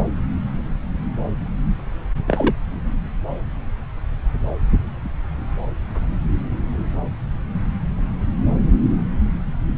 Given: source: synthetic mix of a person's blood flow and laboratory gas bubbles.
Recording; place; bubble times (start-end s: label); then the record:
Doppler ultrasound of blood flow; subclavian vein
2.27-2.54 s: bubbles
From the record:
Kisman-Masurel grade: 112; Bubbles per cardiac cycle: 1 to 2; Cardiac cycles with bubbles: 1 to 10%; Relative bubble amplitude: moderate (0.250 to 0.450); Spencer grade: 1 (occasional bubble signal discernible with the cardiac motion signal, with majority of cardiac periods free of bubbles); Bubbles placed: anywhere in the cardiac cycle